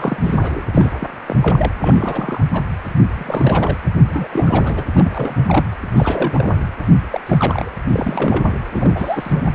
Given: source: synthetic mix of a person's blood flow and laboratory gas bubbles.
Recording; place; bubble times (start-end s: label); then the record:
Doppler ultrasound of blood flow; precordium
0.00-0.66 s: bubbles
0.72-0.93 s: bubbles
0.99-1.07 s: bubbles
1.26-1.36 s: bubbles
1.41-1.72 s: bubbles
1.83-2.43 s: bubbles
2.53-2.62 s: bubbles
3.15-3.78 s: bubbles
4.11-4.84 s: bubbles
4.94-5.67 s: bubbles
5.91-6.55 s: bubbles
7.11-7.21 s: bubbles
7.25-7.71 s: bubbles
7.92-8.54 s: bubbles
8.71-9.43 s: bubbles
9.45-9.51 s: bubbles
From the record:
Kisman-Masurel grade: 342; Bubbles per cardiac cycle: rolling drumbeat, 9 or more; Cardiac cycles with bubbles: 100%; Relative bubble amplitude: moderate (0.250 to 0.450); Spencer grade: 3 (all of the cardiac periods contain showers or single bubble signals, but not dominating or overriding the cardiac motion signals); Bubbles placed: anywhere in the cardiac cycle